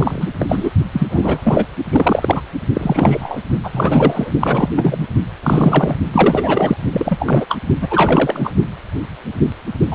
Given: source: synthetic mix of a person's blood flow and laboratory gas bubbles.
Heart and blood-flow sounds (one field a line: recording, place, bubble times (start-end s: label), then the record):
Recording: Doppler ultrasound of blood flow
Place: precordium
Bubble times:
0.00-0.29 s: bubbles
0.39-0.70 s: bubbles
0.92-1.65 s: bubbles
1.92-2.42 s: bubbles
2.73-3.41 s: bubbles
3.64-4.32 s: bubbles
4.41-4.69 s: bubbles
4.76-5.07 s: bubbles
5.42-5.96 s: bubbles
6.12-6.77 s: bubbles
6.92-7.46 s: bubbles
7.49-7.58 s: bubbles
7.81-7.88 s: bubbles
7.90-8.52 s: bubbles
9.91-9.95 s: bubbles
From the record:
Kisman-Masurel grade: 333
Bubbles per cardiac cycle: rolling drumbeat, 9 or more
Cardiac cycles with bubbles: 50 to 99%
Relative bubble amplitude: loud (0.450 to 0.775)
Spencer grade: 3 (all of the cardiac periods contain showers or single bubble signals, but not dominating or overriding the cardiac motion signals)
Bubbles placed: only in the low amplitude regions of the cardiac cycle